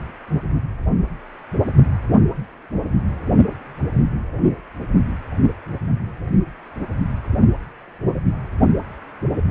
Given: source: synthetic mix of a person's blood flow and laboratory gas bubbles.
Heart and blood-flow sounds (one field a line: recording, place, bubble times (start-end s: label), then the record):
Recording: Doppler ultrasound of blood flow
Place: precordium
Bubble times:
no bubbles
From the record:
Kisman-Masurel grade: 000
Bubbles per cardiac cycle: 0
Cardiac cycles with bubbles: 0%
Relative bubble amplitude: no bubbles discernible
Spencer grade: 0 (complete lack of bubble signals)